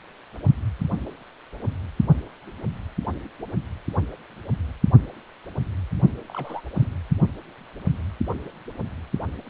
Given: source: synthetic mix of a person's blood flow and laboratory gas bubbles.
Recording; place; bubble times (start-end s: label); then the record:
Doppler ultrasound of blood flow; precordium
6.29-6.61 s: bubbles
6.72-6.88 s: bubbles
From the record:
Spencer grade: 1 (occasional bubble signal discernible with the cardiac motion signal, with majority of cardiac periods free of bubbles); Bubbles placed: only in the low amplitude regions of the cardiac cycle